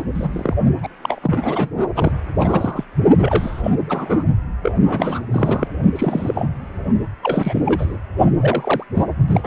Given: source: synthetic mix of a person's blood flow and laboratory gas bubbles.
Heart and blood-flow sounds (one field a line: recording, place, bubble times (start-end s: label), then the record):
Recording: Doppler ultrasound of blood flow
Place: precordium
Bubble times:
0.00-0.02 s: bubbles
0.15-0.55 s: bubbles
0.82-0.88 s: bubbles
1.02-1.71 s: bubbles
1.94-2.11 s: bubbles
2.40-2.84 s: bubbles
3.19-3.72 s: bubbles
3.88-4.23 s: bubbles
4.62-4.71 s: bubbles
4.76-5.22 s: bubbles
5.31-5.67 s: bubbles
5.96-6.49 s: bubbles
7.22-7.62 s: bubbles
7.65-7.97 s: bubbles
8.40-8.84 s: bubbles
8.95-9.06 s: bubbles
9.28-9.47 s: bubbles
From the record:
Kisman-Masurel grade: 342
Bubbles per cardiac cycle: rolling drumbeat, 9 or more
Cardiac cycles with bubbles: 100%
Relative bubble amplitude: moderate (0.250 to 0.450)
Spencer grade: 3 (all of the cardiac periods contain showers or single bubble signals, but not dominating or overriding the cardiac motion signals)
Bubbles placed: only in the low amplitude regions of the cardiac cycle